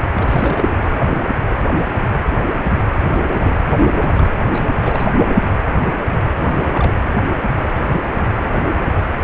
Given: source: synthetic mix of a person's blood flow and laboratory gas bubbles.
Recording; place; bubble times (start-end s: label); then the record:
Doppler ultrasound of blood flow; precordium
0.15-0.95 s: bubbles
3.05-3.59 s: bubbles
3.74-4.31 s: bubbles
4.45-4.64 s: bubbles
4.66-5.08 s: bubbles
6.42-6.94 s: bubbles
From the record:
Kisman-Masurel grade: 221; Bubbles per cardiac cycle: several, 3 to 8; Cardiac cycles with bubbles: 10 to 50%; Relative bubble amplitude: barely perceptible (0.100 to 0.250); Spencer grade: 2 (many but less than half of the cardiac periods contain bubble signals, singularly or in groups); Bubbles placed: anywhere in the cardiac cycle